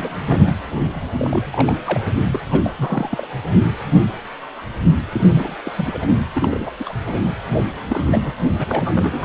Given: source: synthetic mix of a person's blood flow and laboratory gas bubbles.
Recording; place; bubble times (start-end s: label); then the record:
Doppler ultrasound of blood flow; precordium
0.02-0.15 s: bubbles
0.26-0.54 s: bubbles
0.81-0.89 s: bubbles
0.95-1.01 s: bubbles
1.19-1.74 s: bubbles
1.84-2.04 s: bubbles
2.32-2.40 s: bubbles
2.50-3.27 s: bubbles
5.12-5.54 s: bubbles
5.65-5.71 s: bubbles
5.75-6.18 s: bubbles
6.35-6.70 s: bubbles
6.79-6.95 s: bubbles
7.04-7.31 s: bubbles
7.88-8.36 s: bubbles
8.58-8.66 s: bubbles
8.69-8.91 s: bubbles
8.94-9.25 s: bubbles
From the record:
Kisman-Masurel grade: 332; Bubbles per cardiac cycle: rolling drumbeat, 9 or more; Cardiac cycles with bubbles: 50 to 99%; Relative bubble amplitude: moderate (0.250 to 0.450); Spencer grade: 3 (all of the cardiac periods contain showers or single bubble signals, but not dominating or overriding the cardiac motion signals); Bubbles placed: anywhere in the cardiac cycle